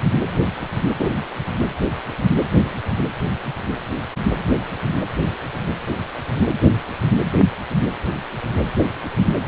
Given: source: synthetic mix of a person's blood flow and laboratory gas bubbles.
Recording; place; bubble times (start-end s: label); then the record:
Doppler ultrasound of blood flow; precordium
0.99-1.13 s: bubbles
From the record:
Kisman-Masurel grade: 113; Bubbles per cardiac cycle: 1 to 2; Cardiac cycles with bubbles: 1 to 10%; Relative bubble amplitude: loud (0.450 to 0.775); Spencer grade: 1 (occasional bubble signal discernible with the cardiac motion signal, with majority of cardiac periods free of bubbles); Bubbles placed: anywhere in the cardiac cycle